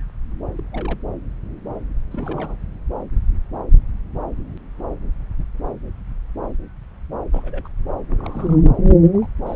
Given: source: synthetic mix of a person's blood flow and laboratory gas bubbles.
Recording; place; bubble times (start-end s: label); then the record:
Doppler ultrasound of blood flow; subclavian vein
0.58-0.64 s: bubbles
0.72-1.06 s: bubbles
2.10-2.56 s: bubbles
7.33-7.68 s: bubbles
8.09-8.15 s: bubbles
8.18-8.64 s: bubbles
9.13-9.28 s: bubbles
9.46-9.56 s: bubbles
From the record:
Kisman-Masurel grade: 221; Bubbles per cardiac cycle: several, 3 to 8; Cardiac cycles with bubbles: 10 to 50%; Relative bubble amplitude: barely perceptible (0.100 to 0.250); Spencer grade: 2 (many but less than half of the cardiac periods contain bubble signals, singularly or in groups); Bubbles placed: anywhere in the cardiac cycle